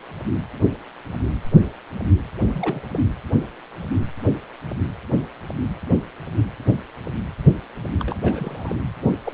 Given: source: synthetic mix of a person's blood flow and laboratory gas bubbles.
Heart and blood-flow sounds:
Doppler ultrasound of blood flow; precordium
2.40-2.48 s: bubbles
2.52-2.81 s: bubbles
2.92-3.00 s: bubbles
7.99-8.81 s: bubbles
9.03-9.17 s: bubbles
9.25-9.34 s: bubbles
From the record:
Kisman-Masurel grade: 221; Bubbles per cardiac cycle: several, 3 to 8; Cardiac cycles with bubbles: 10 to 50%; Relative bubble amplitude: barely perceptible (0.100 to 0.250); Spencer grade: 2 (many but less than half of the cardiac periods contain bubble signals, singularly or in groups); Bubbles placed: anywhere in the cardiac cycle

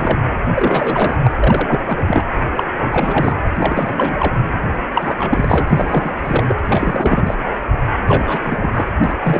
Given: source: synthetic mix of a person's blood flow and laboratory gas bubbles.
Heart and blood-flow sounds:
Doppler ultrasound of blood flow; precordium
0.00-0.22 s: bubbles
0.54-1.18 s: bubbles
1.24-1.30 s: bubbles
1.41-1.79 s: bubbles
1.86-2.23 s: bubbles
2.56-2.63 s: bubbles
2.79-3.37 s: bubbles
3.58-4.39 s: bubbles
4.94-6.14 s: bubbles
6.23-6.44 s: bubbles
6.47-6.55 s: bubbles
6.67-7.34 s: bubbles
8.08-8.70 s: bubbles
8.74-8.89 s: bubbles
9.04-9.15 s: bubbles
9.22-9.40 s: bubbles
From the record:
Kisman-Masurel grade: 343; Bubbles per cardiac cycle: rolling drumbeat, 9 or more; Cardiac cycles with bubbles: 100%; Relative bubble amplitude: loud (0.450 to 0.775); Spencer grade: 3 (all of the cardiac periods contain showers or single bubble signals, but not dominating or overriding the cardiac motion signals); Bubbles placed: anywhere in the cardiac cycle

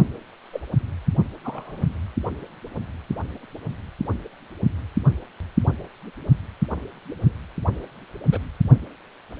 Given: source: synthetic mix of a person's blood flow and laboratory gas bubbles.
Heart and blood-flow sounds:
Doppler ultrasound of blood flow; precordium
0.52-0.60 s: bubbles
1.43-1.87 s: bubbles
7.21-7.32 s: bubbles
8.30-8.38 s: bubbles
From the record:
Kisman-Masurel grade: 121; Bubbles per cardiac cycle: 1 to 2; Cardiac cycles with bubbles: 10 to 50%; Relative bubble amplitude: barely perceptible (0.100 to 0.250); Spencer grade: 2 (many but less than half of the cardiac periods contain bubble signals, singularly or in groups); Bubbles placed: only in the low amplitude regions of the cardiac cycle

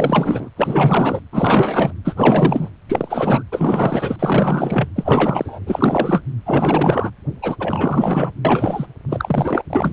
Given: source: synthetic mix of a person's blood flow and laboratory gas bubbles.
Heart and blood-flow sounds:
Doppler ultrasound of blood flow; precordium
0.00-0.49 s: bubbles
0.56-1.21 s: bubbles
1.32-1.93 s: bubbles
2.04-2.69 s: bubbles
2.88-3.43 s: bubbles
3.52-4.17 s: bubbles
4.19-4.89 s: bubbles
4.96-5.59 s: bubbles
5.66-6.23 s: bubbles
6.46-7.11 s: bubbles
7.42-7.56 s: bubbles
7.60-8.32 s: bubbles
8.45-8.87 s: bubbles
9.09-9.62 s: bubbles
9.70-9.92 s: bubbles
From the record:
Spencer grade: 4 (maximum detectable bubble signal sounding continuously throughout systole and diastole of every cardiac period, and overriding the amplitude of the normal cardiac signals); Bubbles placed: anywhere in the cardiac cycle

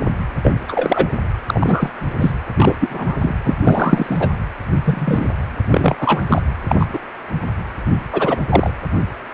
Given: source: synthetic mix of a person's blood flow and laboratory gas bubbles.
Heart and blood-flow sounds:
Doppler ultrasound of blood flow; precordium
0.43-0.52 s: bubbles
0.68-1.17 s: bubbles
1.49-1.90 s: bubbles
2.20-2.33 s: bubbles
2.56-2.75 s: bubbles
2.79-3.18 s: bubbles
3.21-3.35 s: bubbles
3.44-3.56 s: bubbles
3.63-4.28 s: bubbles
4.85-5.28 s: bubbles
5.71-5.96 s: bubbles
6.00-6.23 s: bubbles
6.29-6.42 s: bubbles
6.68-6.76 s: bubbles
6.79-6.87 s: bubbles
6.93-6.99 s: bubbles
8.12-8.42 s: bubbles
8.50-8.70 s: bubbles
From the record:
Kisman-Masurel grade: 233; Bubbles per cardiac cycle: several, 3 to 8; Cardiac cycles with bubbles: 50 to 99%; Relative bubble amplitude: loud (0.450 to 0.775); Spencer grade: 3 (all of the cardiac periods contain showers or single bubble signals, but not dominating or overriding the cardiac motion signals); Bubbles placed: anywhere in the cardiac cycle

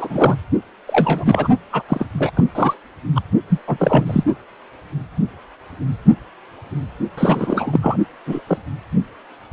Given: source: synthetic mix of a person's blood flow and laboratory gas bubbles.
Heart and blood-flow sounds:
Doppler ultrasound of blood flow; precordium
0.00-0.36 s: bubbles
0.87-1.48 s: bubbles
1.72-1.83 s: bubbles
1.89-2.06 s: bubbles
2.14-2.31 s: bubbles
2.35-2.44 s: bubbles
2.55-2.74 s: bubbles
3.15-3.21 s: bubbles
3.50-3.58 s: bubbles
3.67-4.24 s: bubbles
7.17-7.97 s: bubbles
8.26-8.42 s: bubbles
8.47-8.57 s: bubbles
From the record:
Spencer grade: 3 (all of the cardiac periods contain showers or single bubble signals, but not dominating or overriding the cardiac motion signals); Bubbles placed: only in the low amplitude regions of the cardiac cycle

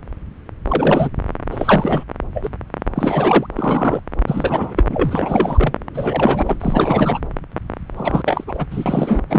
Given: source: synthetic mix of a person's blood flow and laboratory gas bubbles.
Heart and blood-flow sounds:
Doppler ultrasound of blood flow; subclavian vein
0.68-1.09 s: bubbles
1.51-2.04 s: bubbles
2.34-2.49 s: bubbles
2.95-3.46 s: bubbles
3.55-4.00 s: bubbles
4.26-4.84 s: bubbles
4.89-5.76 s: bubbles
5.94-7.19 s: bubbles
7.96-8.44 s: bubbles
8.47-8.66 s: bubbles
8.71-9.21 s: bubbles
9.29-9.39 s: bubbles
From the record:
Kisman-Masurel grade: 333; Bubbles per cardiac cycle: rolling drumbeat, 9 or more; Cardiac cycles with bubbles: 50 to 99%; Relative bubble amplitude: loud (0.450 to 0.775); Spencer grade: 3 (all of the cardiac periods contain showers or single bubble signals, but not dominating or overriding the cardiac motion signals); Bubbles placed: anywhere in the cardiac cycle

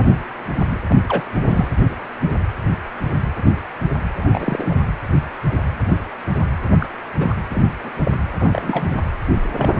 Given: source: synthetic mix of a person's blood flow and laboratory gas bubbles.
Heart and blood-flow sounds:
Doppler ultrasound of blood flow; precordium
0.89-0.95 s: bubbles
1.07-1.24 s: bubbles
1.47-1.68 s: bubbles
4.17-4.75 s: bubbles
6.80-6.86 s: bubbles
7.17-7.34 s: bubbles
7.50-7.65 s: bubbles
7.83-7.90 s: bubbles
8.04-8.12 s: bubbles
8.39-9.01 s: bubbles
9.57-9.73 s: bubbles
From the record:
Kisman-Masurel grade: 222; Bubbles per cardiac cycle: several, 3 to 8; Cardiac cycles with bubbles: 10 to 50%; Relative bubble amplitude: moderate (0.250 to 0.450); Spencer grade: 2 (many but less than half of the cardiac periods contain bubble signals, singularly or in groups); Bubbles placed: anywhere in the cardiac cycle

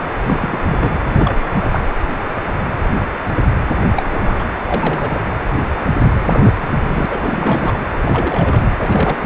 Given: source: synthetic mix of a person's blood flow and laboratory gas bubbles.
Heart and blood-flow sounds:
Doppler ultrasound of blood flow; precordium
0.25-0.59 s: bubbles
0.65-0.95 s: bubbles
1.10-1.40 s: bubbles
1.51-1.89 s: bubbles
3.95-4.48 s: bubbles
4.62-5.22 s: bubbles
6.04-6.71 s: bubbles
6.87-7.06 s: bubbles
7.09-7.74 s: bubbles
8.01-8.63 s: bubbles
8.79-9.17 s: bubbles
From the record:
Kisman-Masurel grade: 332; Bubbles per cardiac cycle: rolling drumbeat, 9 or more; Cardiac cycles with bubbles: 50 to 99%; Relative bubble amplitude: moderate (0.250 to 0.450); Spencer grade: 3 (all of the cardiac periods contain showers or single bubble signals, but not dominating or overriding the cardiac motion signals); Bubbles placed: anywhere in the cardiac cycle

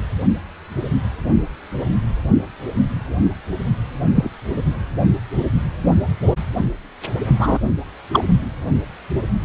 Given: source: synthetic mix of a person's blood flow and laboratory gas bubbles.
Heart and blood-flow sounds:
Doppler ultrasound of blood flow; precordium
4.15-4.31 s: bubbles
7.39-7.58 s: bubbles
8.12-8.24 s: bubbles
From the record:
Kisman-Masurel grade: 123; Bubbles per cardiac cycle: 1 to 2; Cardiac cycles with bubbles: 10 to 50%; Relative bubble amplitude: loud (0.450 to 0.775); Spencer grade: 2 (many but less than half of the cardiac periods contain bubble signals, singularly or in groups); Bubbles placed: only in the low amplitude regions of the cardiac cycle

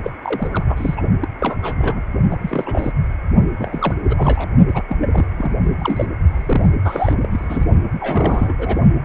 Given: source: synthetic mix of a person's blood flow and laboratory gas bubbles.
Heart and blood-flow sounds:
Doppler ultrasound of blood flow; precordium
0.03-0.11 s: bubbles
0.24-0.49 s: bubbles
0.53-0.64 s: bubbles
0.68-1.03 s: bubbles
1.21-1.28 s: bubbles
1.40-1.58 s: bubbles
1.62-2.02 s: bubbles
2.31-2.37 s: bubbles
2.41-2.92 s: bubbles
3.59-3.94 s: bubbles
4.08-4.50 s: bubbles
4.67-4.82 s: bubbles
4.88-4.97 s: bubbles
5.00-5.25 s: bubbles
5.37-5.51 s: bubbles
5.78-6.05 s: bubbles
6.30-6.70 s: bubbles
6.84-7.14 s: bubbles
7.23-7.28 s: bubbles
7.31-7.66 s: bubbles
8.01-8.54 s: bubbles
8.58-8.80 s: bubbles
From the record:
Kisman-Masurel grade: 342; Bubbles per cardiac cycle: rolling drumbeat, 9 or more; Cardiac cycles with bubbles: 100%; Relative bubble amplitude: moderate (0.250 to 0.450); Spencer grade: 3 (all of the cardiac periods contain showers or single bubble signals, but not dominating or overriding the cardiac motion signals); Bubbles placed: only in the low amplitude regions of the cardiac cycle

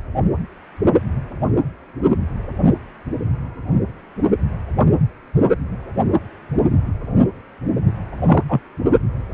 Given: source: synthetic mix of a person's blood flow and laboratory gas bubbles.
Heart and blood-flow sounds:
Doppler ultrasound of blood flow; precordium
8.26-8.42 s: bubbles
8.48-8.60 s: bubbles
9.32-9.34 s: bubbles
From the record:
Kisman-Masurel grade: 123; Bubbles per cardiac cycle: 1 to 2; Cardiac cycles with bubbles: 10 to 50%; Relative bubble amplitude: loud (0.450 to 0.775); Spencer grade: 2 (many but less than half of the cardiac periods contain bubble signals, singularly or in groups); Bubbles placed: only in the low amplitude regions of the cardiac cycle

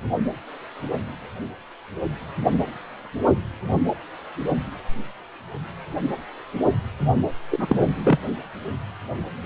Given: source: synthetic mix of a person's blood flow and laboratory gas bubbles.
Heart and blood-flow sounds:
Doppler ultrasound of blood flow; precordium
7.51-7.92 s: bubbles
8.04-8.19 s: bubbles
From the record:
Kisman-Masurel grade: 212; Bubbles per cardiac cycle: several, 3 to 8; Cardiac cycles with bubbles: 1 to 10%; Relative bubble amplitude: moderate (0.250 to 0.450); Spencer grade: 1 (occasional bubble signal discernible with the cardiac motion signal, with majority of cardiac periods free of bubbles); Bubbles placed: only in the low amplitude regions of the cardiac cycle

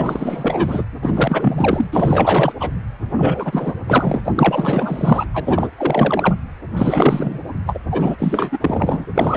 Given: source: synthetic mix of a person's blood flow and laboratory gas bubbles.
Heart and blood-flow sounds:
Doppler ultrasound of blood flow; precordium
0.00-0.84 s: bubbles
1.02-1.87 s: bubbles
1.92-2.52 s: bubbles
2.59-2.72 s: bubbles
3.16-3.74 s: bubbles
3.87-4.21 s: bubbles
4.25-4.32 s: bubbles
4.35-5.25 s: bubbles
5.33-5.69 s: bubbles
5.77-6.34 s: bubbles
6.77-7.40 s: bubbles
7.66-7.79 s: bubbles
7.91-9.05 s: bubbles
9.14-9.37 s: bubbles
From the record:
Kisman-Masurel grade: 444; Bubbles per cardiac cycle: continuous sound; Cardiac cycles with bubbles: 100%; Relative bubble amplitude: maximal (0.775 to 0.999); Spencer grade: 4 (maximum detectable bubble signal sounding continuously throughout systole and diastole of every cardiac period, and overriding the amplitude of the normal cardiac signals); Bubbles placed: anywhere in the cardiac cycle

